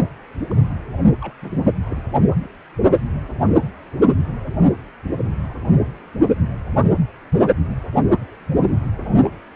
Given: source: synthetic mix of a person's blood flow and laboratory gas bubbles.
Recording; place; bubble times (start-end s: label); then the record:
Doppler ultrasound of blood flow; precordium
0.50-0.54 s: bubbles
1.21-1.33 s: bubbles
1.42-1.51 s: bubbles
1.84-2.02 s: bubbles
2.42-2.49 s: bubbles
8.97-9.08 s: bubbles
9.22-9.36 s: bubbles
From the record:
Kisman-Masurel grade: 221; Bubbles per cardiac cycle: several, 3 to 8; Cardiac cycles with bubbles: 10 to 50%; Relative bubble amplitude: barely perceptible (0.100 to 0.250); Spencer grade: 2 (many but less than half of the cardiac periods contain bubble signals, singularly or in groups); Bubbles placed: only in the low amplitude regions of the cardiac cycle